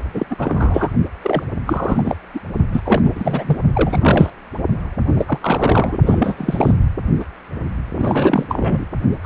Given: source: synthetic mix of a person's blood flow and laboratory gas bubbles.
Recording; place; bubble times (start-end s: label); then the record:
Doppler ultrasound of blood flow; precordium
0.14-0.26 s: bubbles
0.30-0.36 s: bubbles
0.38-0.90 s: bubbles
1.21-1.44 s: bubbles
1.67-2.17 s: bubbles
2.34-2.40 s: bubbles
2.72-2.81 s: bubbles
2.85-3.58 s: bubbles
3.74-4.30 s: bubbles
5.13-5.38 s: bubbles
5.41-5.98 s: bubbles
6.03-6.72 s: bubbles
7.20-7.25 s: bubbles
7.94-8.46 s: bubbles
8.49-8.86 s: bubbles
9.23-9.26 s: bubbles
From the record:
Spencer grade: 3 (all of the cardiac periods contain showers or single bubble signals, but not dominating or overriding the cardiac motion signals); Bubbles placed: only in the low amplitude regions of the cardiac cycle